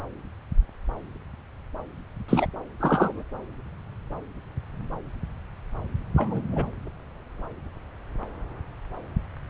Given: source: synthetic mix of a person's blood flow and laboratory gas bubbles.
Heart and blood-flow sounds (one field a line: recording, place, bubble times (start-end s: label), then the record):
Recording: Doppler ultrasound of blood flow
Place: subclavian vein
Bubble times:
2.28-2.46 s: bubbles
2.79-3.23 s: bubbles
6.17-6.42 s: bubbles
6.52-6.64 s: bubbles
From the record:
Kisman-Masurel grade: 122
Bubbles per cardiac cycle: 1 to 2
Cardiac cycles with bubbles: 10 to 50%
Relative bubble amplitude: moderate (0.250 to 0.450)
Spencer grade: 2 (many but less than half of the cardiac periods contain bubble signals, singularly or in groups)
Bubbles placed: anywhere in the cardiac cycle